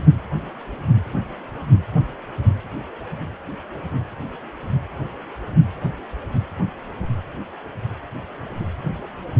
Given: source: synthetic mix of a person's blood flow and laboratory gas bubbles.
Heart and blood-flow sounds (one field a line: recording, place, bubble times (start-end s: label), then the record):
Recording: Doppler ultrasound of blood flow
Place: precordium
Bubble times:
no bubbles
From the record:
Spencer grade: 0 (complete lack of bubble signals)